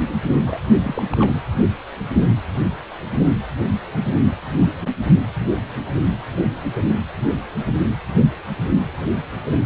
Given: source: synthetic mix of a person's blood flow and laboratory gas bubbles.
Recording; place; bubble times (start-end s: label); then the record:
Doppler ultrasound of blood flow; precordium
0.46-0.58 s: bubbles
0.82-1.03 s: bubbles
1.11-1.32 s: bubbles
From the record:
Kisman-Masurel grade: 211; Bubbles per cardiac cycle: several, 3 to 8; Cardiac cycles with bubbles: 1 to 10%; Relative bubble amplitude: barely perceptible (0.100 to 0.250); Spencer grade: 1 (occasional bubble signal discernible with the cardiac motion signal, with majority of cardiac periods free of bubbles); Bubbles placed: anywhere in the cardiac cycle